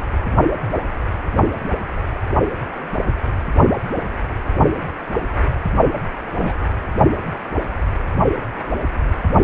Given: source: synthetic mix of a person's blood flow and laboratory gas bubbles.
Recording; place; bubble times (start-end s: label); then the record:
Doppler ultrasound of blood flow; precordium
6.32-6.67 s: bubbles
From the record:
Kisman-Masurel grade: 112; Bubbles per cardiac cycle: 1 to 2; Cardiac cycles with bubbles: 1 to 10%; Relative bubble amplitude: moderate (0.250 to 0.450); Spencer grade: 1 (occasional bubble signal discernible with the cardiac motion signal, with majority of cardiac periods free of bubbles); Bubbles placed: only in the low amplitude regions of the cardiac cycle